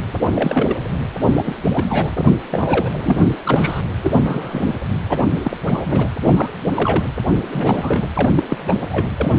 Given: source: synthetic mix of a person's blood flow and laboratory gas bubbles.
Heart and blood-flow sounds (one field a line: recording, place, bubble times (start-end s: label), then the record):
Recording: Doppler ultrasound of blood flow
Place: precordium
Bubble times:
0.34-0.76 s: bubbles
1.35-1.55 s: bubbles
1.74-2.10 s: bubbles
2.16-2.25 s: bubbles
2.50-2.89 s: bubbles
2.97-3.35 s: bubbles
3.45-3.82 s: bubbles
4.03-4.75 s: bubbles
5.09-5.25 s: bubbles
5.44-5.57 s: bubbles
5.66-6.09 s: bubbles
6.18-6.51 s: bubbles
6.75-7.05 s: bubbles
7.52-8.04 s: bubbles
8.15-8.30 s: bubbles
8.35-8.43 s: bubbles
8.49-8.57 s: bubbles
8.67-8.74 s: bubbles
8.92-9.06 s: bubbles
9.17-9.33 s: bubbles
9.36-9.39 s: bubbles
From the record:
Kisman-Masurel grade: 242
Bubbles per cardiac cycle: several, 3 to 8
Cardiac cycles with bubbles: 100%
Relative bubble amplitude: moderate (0.250 to 0.450)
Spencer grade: 3 (all of the cardiac periods contain showers or single bubble signals, but not dominating or overriding the cardiac motion signals)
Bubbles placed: anywhere in the cardiac cycle